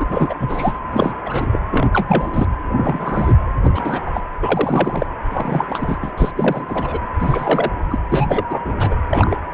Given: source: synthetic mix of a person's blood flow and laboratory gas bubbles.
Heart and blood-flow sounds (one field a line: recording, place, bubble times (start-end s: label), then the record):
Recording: Doppler ultrasound of blood flow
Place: precordium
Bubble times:
0.00-0.05 s: bubbles
0.10-0.34 s: bubbles
0.40-0.79 s: bubbles
0.91-1.17 s: bubbles
1.25-1.59 s: bubbles
1.70-1.90 s: bubbles
1.92-2.48 s: bubbles
2.77-3.35 s: bubbles
3.63-3.71 s: bubbles
3.73-4.02 s: bubbles
4.06-4.11 s: bubbles
4.14-4.22 s: bubbles
4.42-5.06 s: bubbles
5.29-5.65 s: bubbles
5.69-5.98 s: bubbles
6.02-6.12 s: bubbles
6.17-6.32 s: bubbles
6.37-6.98 s: bubbles
7.19-7.71 s: bubbles
7.90-7.98 s: bubbles
8.11-8.44 s: bubbles
8.50-8.62 s: bubbles
8.64-8.73 s: bubbles
8.79-8.96 s: bubbles
9.10-9.37 s: bubbles
From the record:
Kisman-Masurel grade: 343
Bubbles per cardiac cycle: rolling drumbeat, 9 or more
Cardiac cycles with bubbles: 100%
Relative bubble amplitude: loud (0.450 to 0.775)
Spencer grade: 3 (all of the cardiac periods contain showers or single bubble signals, but not dominating or overriding the cardiac motion signals)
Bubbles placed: anywhere in the cardiac cycle